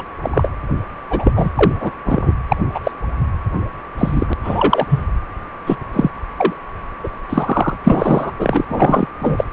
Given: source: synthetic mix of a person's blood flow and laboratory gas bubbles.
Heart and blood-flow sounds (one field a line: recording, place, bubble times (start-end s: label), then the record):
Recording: Doppler ultrasound of blood flow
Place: precordium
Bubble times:
0.00-0.03 s: bubbles
0.22-0.48 s: bubbles
1.10-1.32 s: bubbles
1.35-1.49 s: bubbles
1.56-1.72 s: bubbles
1.79-1.92 s: bubbles
2.05-2.32 s: bubbles
2.48-2.56 s: bubbles
2.73-2.79 s: bubbles
2.83-2.92 s: bubbles
3.98-4.33 s: bubbles
4.43-4.87 s: bubbles
4.89-5.04 s: bubbles
5.66-5.76 s: bubbles
5.93-6.10 s: bubbles
6.37-6.54 s: bubbles
7.04-7.09 s: bubbles
7.29-7.77 s: bubbles
7.83-8.33 s: bubbles
8.39-8.65 s: bubbles
8.69-9.07 s: bubbles
9.20-9.45 s: bubbles
From the record:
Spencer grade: 3 (all of the cardiac periods contain showers or single bubble signals, but not dominating or overriding the cardiac motion signals)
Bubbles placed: anywhere in the cardiac cycle